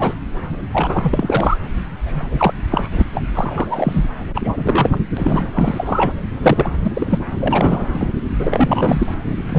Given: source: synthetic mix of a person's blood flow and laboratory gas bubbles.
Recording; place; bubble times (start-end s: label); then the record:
Doppler ultrasound of blood flow; subclavian vein
0.00-0.14 s: bubbles
0.72-1.57 s: bubbles
2.06-2.54 s: bubbles
2.70-2.89 s: bubbles
2.91-3.03 s: bubbles
3.12-3.24 s: bubbles
3.34-4.04 s: bubbles
4.34-4.98 s: bubbles
5.17-5.46 s: bubbles
5.54-6.11 s: bubbles
6.42-6.68 s: bubbles
6.83-7.19 s: bubbles
7.40-8.15 s: bubbles
8.38-9.15 s: bubbles
9.49-9.59 s: bubbles
From the record:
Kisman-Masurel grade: 243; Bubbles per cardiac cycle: several, 3 to 8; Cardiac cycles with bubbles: 100%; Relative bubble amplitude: loud (0.450 to 0.775); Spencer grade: 3 (all of the cardiac periods contain showers or single bubble signals, but not dominating or overriding the cardiac motion signals); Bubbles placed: anywhere in the cardiac cycle